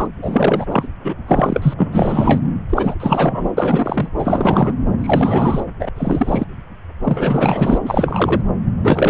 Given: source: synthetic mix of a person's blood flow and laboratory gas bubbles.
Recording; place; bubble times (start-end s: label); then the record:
Doppler ultrasound of blood flow; subclavian vein
0.00-0.08 s: bubbles
0.22-0.66 s: bubbles
0.70-0.88 s: bubbles
1.04-1.16 s: bubbles
1.27-1.74 s: bubbles
1.77-1.86 s: bubbles
1.92-2.42 s: bubbles
2.69-2.94 s: bubbles
3.00-3.50 s: bubbles
3.57-4.10 s: bubbles
4.17-4.72 s: bubbles
5.00-5.65 s: bubbles
5.79-5.89 s: bubbles
5.96-6.45 s: bubbles
7.04-7.78 s: bubbles
7.83-8.41 s: bubbles
8.83-9.10 s: bubbles
From the record:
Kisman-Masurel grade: 333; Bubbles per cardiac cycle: rolling drumbeat, 9 or more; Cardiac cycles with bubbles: 50 to 99%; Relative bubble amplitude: loud (0.450 to 0.775); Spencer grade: 3 (all of the cardiac periods contain showers or single bubble signals, but not dominating or overriding the cardiac motion signals); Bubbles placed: anywhere in the cardiac cycle